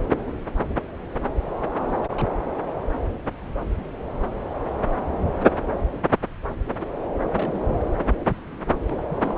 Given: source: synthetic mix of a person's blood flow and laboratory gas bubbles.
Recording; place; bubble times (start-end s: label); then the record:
Doppler ultrasound of blood flow; subclavian vein
1.79-1.97 s: bubbles
2.01-2.32 s: bubbles
7.33-7.71 s: bubbles
8.87-9.04 s: bubbles
9.10-9.18 s: bubbles
9.22-9.38 s: bubbles
From the record:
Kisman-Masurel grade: 221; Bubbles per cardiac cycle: several, 3 to 8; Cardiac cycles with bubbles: 10 to 50%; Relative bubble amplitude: barely perceptible (0.100 to 0.250); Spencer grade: 2 (many but less than half of the cardiac periods contain bubble signals, singularly or in groups); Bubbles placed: anywhere in the cardiac cycle